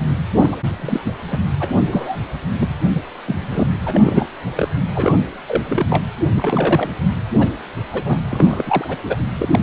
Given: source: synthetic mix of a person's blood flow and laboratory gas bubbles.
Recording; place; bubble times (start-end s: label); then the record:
Doppler ultrasound of blood flow; precordium
0.34-0.57 s: bubbles
0.68-1.13 s: bubbles
1.31-1.39 s: bubbles
1.59-1.76 s: bubbles
1.92-2.18 s: bubbles
2.60-2.73 s: bubbles
2.93-3.01 s: bubbles
3.27-3.68 s: bubbles
3.87-4.27 s: bubbles
4.55-4.68 s: bubbles
4.95-5.15 s: bubbles
5.46-5.63 s: bubbles
5.68-5.85 s: bubbles
5.90-6.04 s: bubbles
6.36-6.90 s: bubbles
7.39-7.48 s: bubbles
7.92-8.21 s: bubbles
8.28-8.97 s: bubbles
9.04-9.17 s: bubbles
9.38-9.63 s: bubbles
From the record:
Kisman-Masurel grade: 242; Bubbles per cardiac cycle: several, 3 to 8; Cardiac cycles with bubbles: 100%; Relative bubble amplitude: moderate (0.250 to 0.450); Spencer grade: 3 (all of the cardiac periods contain showers or single bubble signals, but not dominating or overriding the cardiac motion signals); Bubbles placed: anywhere in the cardiac cycle